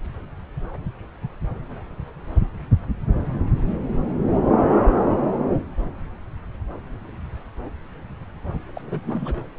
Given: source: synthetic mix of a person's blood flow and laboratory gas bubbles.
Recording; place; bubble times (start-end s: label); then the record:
Doppler ultrasound of blood flow; subclavian vein
8.75-8.81 s: bubbles
8.85-9.01 s: bubbles
9.04-9.44 s: bubbles
From the record:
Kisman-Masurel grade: 221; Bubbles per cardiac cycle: several, 3 to 8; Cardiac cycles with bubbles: 10 to 50%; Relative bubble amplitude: barely perceptible (0.100 to 0.250); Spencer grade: 2 (many but less than half of the cardiac periods contain bubble signals, singularly or in groups); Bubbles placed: anywhere in the cardiac cycle